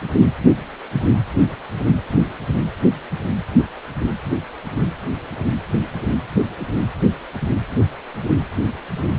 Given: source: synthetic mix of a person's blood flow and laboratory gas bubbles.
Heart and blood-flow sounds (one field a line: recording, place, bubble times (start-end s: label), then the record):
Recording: Doppler ultrasound of blood flow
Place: precordium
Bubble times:
no bubbles
From the record:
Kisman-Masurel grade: 000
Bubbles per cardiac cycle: 0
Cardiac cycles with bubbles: 0%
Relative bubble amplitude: no bubbles discernible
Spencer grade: 0 (complete lack of bubble signals)